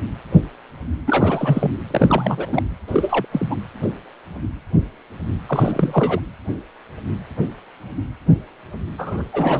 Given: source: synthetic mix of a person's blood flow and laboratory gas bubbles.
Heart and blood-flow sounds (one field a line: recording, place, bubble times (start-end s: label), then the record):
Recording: Doppler ultrasound of blood flow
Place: precordium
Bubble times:
1.06-1.72 s: bubbles
1.91-2.62 s: bubbles
2.87-3.26 s: bubbles
3.32-3.56 s: bubbles
5.48-6.20 s: bubbles
8.98-9.22 s: bubbles
9.32-9.60 s: bubbles
From the record:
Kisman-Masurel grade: 332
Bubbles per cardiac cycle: rolling drumbeat, 9 or more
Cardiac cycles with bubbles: 50 to 99%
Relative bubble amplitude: moderate (0.250 to 0.450)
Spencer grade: 3 (all of the cardiac periods contain showers or single bubble signals, but not dominating or overriding the cardiac motion signals)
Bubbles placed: anywhere in the cardiac cycle